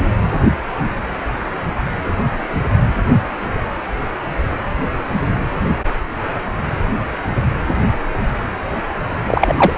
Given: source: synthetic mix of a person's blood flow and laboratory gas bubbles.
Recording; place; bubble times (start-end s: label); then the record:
Doppler ultrasound of blood flow; precordium
9.28-9.72 s: bubbles
From the record:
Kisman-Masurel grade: 213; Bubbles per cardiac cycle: several, 3 to 8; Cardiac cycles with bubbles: 1 to 10%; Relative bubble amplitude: loud (0.450 to 0.775); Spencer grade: 1 (occasional bubble signal discernible with the cardiac motion signal, with majority of cardiac periods free of bubbles); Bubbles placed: anywhere in the cardiac cycle